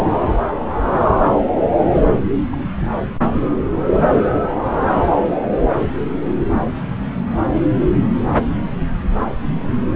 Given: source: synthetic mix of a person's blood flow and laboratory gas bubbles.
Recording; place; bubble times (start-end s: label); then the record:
Doppler ultrasound of blood flow; subclavian vein
2.52-2.56 s: bubbles
From the record:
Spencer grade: 1 (occasional bubble signal discernible with the cardiac motion signal, with majority of cardiac periods free of bubbles); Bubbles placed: anywhere in the cardiac cycle